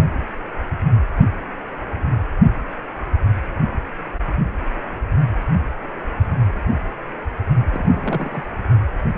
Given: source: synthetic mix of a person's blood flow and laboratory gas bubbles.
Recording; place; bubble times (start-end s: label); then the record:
Doppler ultrasound of blood flow; precordium
7.72-8.42 s: bubbles
From the record:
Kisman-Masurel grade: 122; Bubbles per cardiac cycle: 1 to 2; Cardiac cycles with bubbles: 10 to 50%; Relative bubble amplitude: moderate (0.250 to 0.450); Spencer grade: 2 (many but less than half of the cardiac periods contain bubble signals, singularly or in groups); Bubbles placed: only in the low amplitude regions of the cardiac cycle